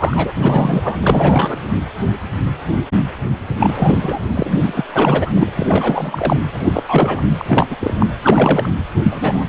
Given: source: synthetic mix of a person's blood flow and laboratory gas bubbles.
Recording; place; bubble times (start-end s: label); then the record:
Doppler ultrasound of blood flow; precordium
0.00-0.32 s: bubbles
0.36-0.96 s: bubbles
1.02-1.56 s: bubbles
3.59-4.20 s: bubbles
4.29-4.60 s: bubbles
4.64-4.84 s: bubbles
4.92-5.31 s: bubbles
5.35-5.51 s: bubbles
5.56-6.40 s: bubbles
6.52-6.84 s: bubbles
6.88-7.23 s: bubbles
7.38-7.68 s: bubbles
7.71-7.76 s: bubbles
7.80-7.94 s: bubbles
8.00-8.07 s: bubbles
8.22-8.69 s: bubbles
9.03-9.47 s: bubbles
From the record:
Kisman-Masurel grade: 333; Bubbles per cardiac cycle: rolling drumbeat, 9 or more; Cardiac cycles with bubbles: 50 to 99%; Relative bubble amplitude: loud (0.450 to 0.775); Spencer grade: 3 (all of the cardiac periods contain showers or single bubble signals, but not dominating or overriding the cardiac motion signals); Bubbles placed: anywhere in the cardiac cycle